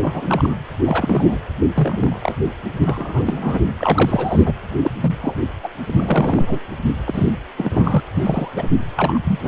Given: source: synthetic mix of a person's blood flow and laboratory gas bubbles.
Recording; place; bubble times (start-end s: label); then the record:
Doppler ultrasound of blood flow; precordium
0.00-0.57 s: bubbles
0.85-1.40 s: bubbles
1.73-2.34 s: bubbles
2.83-3.73 s: bubbles
3.77-4.54 s: bubbles
4.81-4.91 s: bubbles
5.00-5.16 s: bubbles
5.21-5.34 s: bubbles
5.63-5.68 s: bubbles
5.84-6.59 s: bubbles
7.05-7.30 s: bubbles
7.58-8.00 s: bubbles
8.14-8.48 s: bubbles
8.56-8.68 s: bubbles
8.96-9.18 s: bubbles
9.24-9.39 s: bubbles
9.43-9.48 s: bubbles
From the record:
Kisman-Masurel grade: 242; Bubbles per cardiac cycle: several, 3 to 8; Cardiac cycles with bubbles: 100%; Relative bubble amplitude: moderate (0.250 to 0.450); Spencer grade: 3 (all of the cardiac periods contain showers or single bubble signals, but not dominating or overriding the cardiac motion signals); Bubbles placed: anywhere in the cardiac cycle